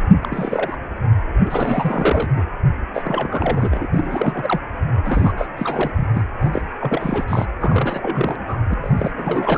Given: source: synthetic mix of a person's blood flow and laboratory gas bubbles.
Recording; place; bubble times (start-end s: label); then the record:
Doppler ultrasound of blood flow; precordium
0.21-0.76 s: bubbles
1.45-2.44 s: bubbles
2.94-3.86 s: bubbles
3.94-4.61 s: bubbles
5.04-5.33 s: bubbles
5.38-5.46 s: bubbles
5.57-5.91 s: bubbles
5.96-6.08 s: bubbles
6.13-6.23 s: bubbles
6.39-6.67 s: bubbles
6.81-7.25 s: bubbles
7.28-7.46 s: bubbles
7.60-8.36 s: bubbles
8.47-8.57 s: bubbles
8.70-8.74 s: bubbles
8.80-9.11 s: bubbles
9.17-9.58 s: bubbles
From the record:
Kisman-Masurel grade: 342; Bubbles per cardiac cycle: rolling drumbeat, 9 or more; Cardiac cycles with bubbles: 100%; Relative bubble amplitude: moderate (0.250 to 0.450); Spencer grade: 3 (all of the cardiac periods contain showers or single bubble signals, but not dominating or overriding the cardiac motion signals); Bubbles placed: anywhere in the cardiac cycle